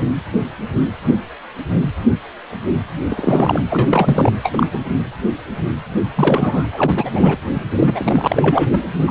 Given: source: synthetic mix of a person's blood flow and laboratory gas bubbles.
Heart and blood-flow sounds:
Doppler ultrasound of blood flow; precordium
3.10-3.61 s: bubbles
3.69-3.88 s: bubbles
3.90-4.31 s: bubbles
4.43-4.67 s: bubbles
4.72-4.79 s: bubbles
6.15-6.66 s: bubbles
6.73-7.10 s: bubbles
7.14-7.36 s: bubbles
7.79-8.80 s: bubbles
9.07-9.11 s: bubbles
From the record:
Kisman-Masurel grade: 233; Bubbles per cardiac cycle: several, 3 to 8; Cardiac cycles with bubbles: 50 to 99%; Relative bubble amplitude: loud (0.450 to 0.775); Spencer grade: 3 (all of the cardiac periods contain showers or single bubble signals, but not dominating or overriding the cardiac motion signals); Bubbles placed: anywhere in the cardiac cycle

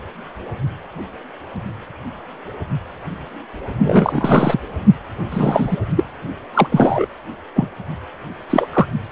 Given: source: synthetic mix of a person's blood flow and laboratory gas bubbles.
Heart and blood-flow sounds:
Doppler ultrasound of blood flow; precordium
3.82-4.61 s: bubbles
5.30-5.77 s: bubbles
5.96-6.04 s: bubbles
6.54-6.67 s: bubbles
6.71-7.06 s: bubbles
7.55-7.68 s: bubbles
8.49-8.68 s: bubbles
8.73-8.87 s: bubbles
From the record:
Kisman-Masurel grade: 233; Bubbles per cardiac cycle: several, 3 to 8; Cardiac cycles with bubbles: 50 to 99%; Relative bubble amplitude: loud (0.450 to 0.775); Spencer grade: 3 (all of the cardiac periods contain showers or single bubble signals, but not dominating or overriding the cardiac motion signals); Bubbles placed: only in the low amplitude regions of the cardiac cycle

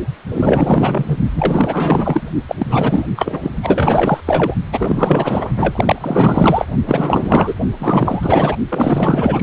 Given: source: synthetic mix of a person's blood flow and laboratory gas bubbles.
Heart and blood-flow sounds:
Doppler ultrasound of blood flow; precordium
0.33-1.17 s: bubbles
1.35-2.28 s: bubbles
2.48-2.55 s: bubbles
2.59-3.04 s: bubbles
3.16-3.54 s: bubbles
3.63-4.21 s: bubbles
4.25-4.55 s: bubbles
4.72-5.50 s: bubbles
5.56-6.66 s: bubbles
6.86-7.54 s: bubbles
7.80-8.56 s: bubbles
8.68-9.43 s: bubbles
From the record:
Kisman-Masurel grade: 444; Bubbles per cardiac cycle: continuous sound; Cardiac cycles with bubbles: 100%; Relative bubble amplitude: maximal (0.775 to 0.999); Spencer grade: 4 (maximum detectable bubble signal sounding continuously throughout systole and diastole of every cardiac period, and overriding the amplitude of the normal cardiac signals); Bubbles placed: only in the low amplitude regions of the cardiac cycle

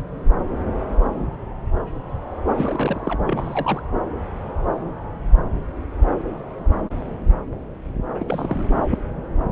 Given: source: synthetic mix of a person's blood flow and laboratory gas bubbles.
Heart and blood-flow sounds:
Doppler ultrasound of blood flow; subclavian vein
2.57-3.20 s: bubbles
3.25-3.82 s: bubbles
8.14-8.68 s: bubbles
From the record:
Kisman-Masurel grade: 221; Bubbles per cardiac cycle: several, 3 to 8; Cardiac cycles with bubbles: 10 to 50%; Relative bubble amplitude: barely perceptible (0.100 to 0.250); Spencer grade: 2 (many but less than half of the cardiac periods contain bubble signals, singularly or in groups); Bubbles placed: anywhere in the cardiac cycle

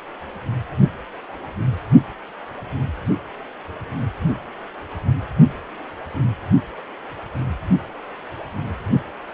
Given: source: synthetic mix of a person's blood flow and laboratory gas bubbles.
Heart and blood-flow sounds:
Doppler ultrasound of blood flow; precordium
no bubbles
From the record:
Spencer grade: 0 (complete lack of bubble signals)

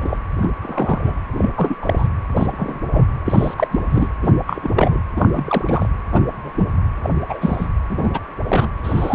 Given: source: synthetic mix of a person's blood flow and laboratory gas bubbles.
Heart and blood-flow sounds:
Doppler ultrasound of blood flow; precordium
0.00-0.17 s: bubbles
0.42-0.50 s: bubbles
0.61-1.14 s: bubbles
1.38-1.50 s: bubbles
1.56-1.77 s: bubbles
1.82-2.08 s: bubbles
2.36-2.76 s: bubbles
2.92-3.05 s: bubbles
3.25-3.54 s: bubbles
3.57-3.68 s: bubbles
3.71-3.79 s: bubbles
3.90-4.08 s: bubbles
4.22-4.33 s: bubbles
4.47-5.00 s: bubbles
5.16-5.89 s: bubbles
6.11-6.22 s: bubbles
6.33-6.72 s: bubbles
7.04-7.10 s: bubbles
7.29-7.68 s: bubbles
7.89-8.11 s: bubbles
8.13-8.20 s: bubbles
8.46-8.69 s: bubbles
8.83-9.15 s: bubbles
From the record:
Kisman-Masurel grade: 242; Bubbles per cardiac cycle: several, 3 to 8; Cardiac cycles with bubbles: 100%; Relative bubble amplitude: moderate (0.250 to 0.450); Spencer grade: 3 (all of the cardiac periods contain showers or single bubble signals, but not dominating or overriding the cardiac motion signals); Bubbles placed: anywhere in the cardiac cycle

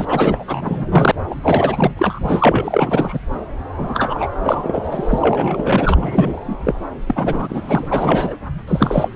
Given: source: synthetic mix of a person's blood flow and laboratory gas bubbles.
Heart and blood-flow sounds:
Doppler ultrasound of blood flow; subclavian vein
0.00-0.44 s: bubbles
0.47-1.11 s: bubbles
1.30-1.35 s: bubbles
1.43-2.19 s: bubbles
2.23-3.20 s: bubbles
3.77-4.28 s: bubbles
4.43-6.74 s: bubbles
7.06-8.36 s: bubbles
8.67-9.09 s: bubbles
From the record:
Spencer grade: 4 (maximum detectable bubble signal sounding continuously throughout systole and diastole of every cardiac period, and overriding the amplitude of the normal cardiac signals); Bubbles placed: anywhere in the cardiac cycle

